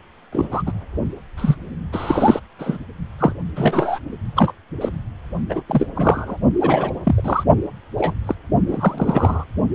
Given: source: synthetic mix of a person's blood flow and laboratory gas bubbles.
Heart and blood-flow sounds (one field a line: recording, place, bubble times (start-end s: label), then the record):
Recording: Doppler ultrasound of blood flow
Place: precordium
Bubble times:
0.32-0.48 s: bubbles
0.51-0.62 s: bubbles
0.66-0.72 s: bubbles
1.36-1.55 s: bubbles
1.92-2.40 s: bubbles
2.58-2.77 s: bubbles
3.19-3.33 s: bubbles
3.56-3.99 s: bubbles
4.36-4.53 s: bubbles
4.80-4.89 s: bubbles
5.49-5.62 s: bubbles
5.68-5.87 s: bubbles
5.95-6.37 s: bubbles
6.61-6.90 s: bubbles
7.04-7.43 s: bubbles
7.98-8.14 s: bubbles
8.25-8.35 s: bubbles
8.69-9.45 s: bubbles
From the record:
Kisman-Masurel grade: 243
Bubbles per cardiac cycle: several, 3 to 8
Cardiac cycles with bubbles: 100%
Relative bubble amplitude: loud (0.450 to 0.775)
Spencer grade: 3 (all of the cardiac periods contain showers or single bubble signals, but not dominating or overriding the cardiac motion signals)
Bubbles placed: only in the low amplitude regions of the cardiac cycle